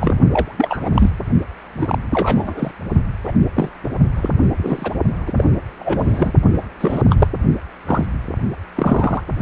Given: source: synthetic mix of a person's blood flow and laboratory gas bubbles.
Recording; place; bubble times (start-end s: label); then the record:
Doppler ultrasound of blood flow; precordium
0.00-0.15 s: bubbles
0.31-0.55 s: bubbles
0.57-0.88 s: bubbles
0.94-1.10 s: bubbles
1.74-1.98 s: bubbles
2.10-2.72 s: bubbles
3.25-3.32 s: bubbles
3.53-3.69 s: bubbles
3.83-3.89 s: bubbles
4.16-4.29 s: bubbles
4.57-4.92 s: bubbles
5.26-5.32 s: bubbles
5.36-5.44 s: bubbles
5.79-6.32 s: bubbles
6.51-6.60 s: bubbles
6.80-7.02 s: bubbles
7.09-7.27 s: bubbles
7.86-8.05 s: bubbles
8.75-9.23 s: bubbles
From the record:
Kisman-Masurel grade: 242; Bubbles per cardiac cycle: several, 3 to 8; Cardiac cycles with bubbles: 100%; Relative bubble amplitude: moderate (0.250 to 0.450); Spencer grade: 3 (all of the cardiac periods contain showers or single bubble signals, but not dominating or overriding the cardiac motion signals); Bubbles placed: only in the low amplitude regions of the cardiac cycle